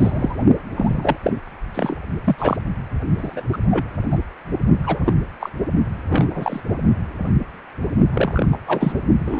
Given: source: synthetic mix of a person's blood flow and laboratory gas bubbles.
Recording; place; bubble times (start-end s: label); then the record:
Doppler ultrasound of blood flow; precordium
0.00-0.36 s: bubbles
0.76-1.18 s: bubbles
1.22-1.33 s: bubbles
1.74-1.97 s: bubbles
2.24-2.57 s: bubbles
3.17-3.44 s: bubbles
3.52-3.58 s: bubbles
3.70-3.88 s: bubbles
4.11-4.18 s: bubbles
4.83-5.00 s: bubbles
5.04-5.14 s: bubbles
5.40-5.50 s: bubbles
6.10-6.61 s: bubbles
8.12-8.46 s: bubbles
8.52-8.58 s: bubbles
8.66-8.93 s: bubbles
9.19-9.40 s: bubbles
From the record:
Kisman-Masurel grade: 233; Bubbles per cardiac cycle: several, 3 to 8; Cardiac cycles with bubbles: 50 to 99%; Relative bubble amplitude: loud (0.450 to 0.775); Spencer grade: 3 (all of the cardiac periods contain showers or single bubble signals, but not dominating or overriding the cardiac motion signals); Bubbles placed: only in the low amplitude regions of the cardiac cycle